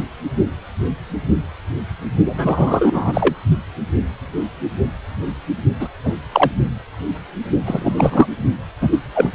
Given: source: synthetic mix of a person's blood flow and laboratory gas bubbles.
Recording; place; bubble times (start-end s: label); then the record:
Doppler ultrasound of blood flow; precordium
0.00-0.04 s: bubbles
2.25-3.35 s: bubbles
5.79-5.88 s: bubbles
6.04-6.14 s: bubbles
6.32-6.51 s: bubbles
7.65-8.26 s: bubbles
8.81-8.98 s: bubbles
9.14-9.30 s: bubbles
From the record:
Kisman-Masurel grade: 233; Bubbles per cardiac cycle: several, 3 to 8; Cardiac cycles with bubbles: 50 to 99%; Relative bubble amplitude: loud (0.450 to 0.775); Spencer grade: 3 (all of the cardiac periods contain showers or single bubble signals, but not dominating or overriding the cardiac motion signals); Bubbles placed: only in the low amplitude regions of the cardiac cycle